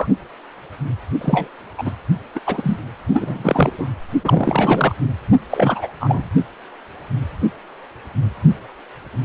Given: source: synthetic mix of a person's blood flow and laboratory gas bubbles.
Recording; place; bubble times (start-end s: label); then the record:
Doppler ultrasound of blood flow; precordium
0.00-0.08 s: bubbles
1.21-1.48 s: bubbles
1.78-1.92 s: bubbles
2.35-2.40 s: bubbles
2.46-2.79 s: bubbles
3.11-3.94 s: bubbles
4.23-4.95 s: bubbles
5.50-5.88 s: bubbles
6.00-6.28 s: bubbles
From the record:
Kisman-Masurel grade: 332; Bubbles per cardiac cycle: rolling drumbeat, 9 or more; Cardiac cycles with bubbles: 50 to 99%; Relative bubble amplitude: moderate (0.250 to 0.450); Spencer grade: 3 (all of the cardiac periods contain showers or single bubble signals, but not dominating or overriding the cardiac motion signals); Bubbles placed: only in the low amplitude regions of the cardiac cycle